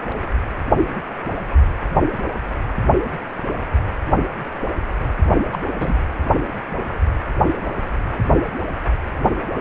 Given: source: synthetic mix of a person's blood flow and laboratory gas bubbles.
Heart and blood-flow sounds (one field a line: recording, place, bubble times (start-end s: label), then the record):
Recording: Doppler ultrasound of blood flow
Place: precordium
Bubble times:
5.53-5.58 s: bubbles
5.80-5.94 s: bubbles
From the record:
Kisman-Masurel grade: 113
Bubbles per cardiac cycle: 1 to 2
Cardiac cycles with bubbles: 1 to 10%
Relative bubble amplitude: loud (0.450 to 0.775)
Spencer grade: 1 (occasional bubble signal discernible with the cardiac motion signal, with majority of cardiac periods free of bubbles)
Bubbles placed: anywhere in the cardiac cycle